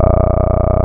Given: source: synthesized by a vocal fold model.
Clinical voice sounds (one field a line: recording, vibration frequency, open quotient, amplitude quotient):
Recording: sustained vowel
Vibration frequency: 30 Hz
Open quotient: 0.3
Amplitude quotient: 1.1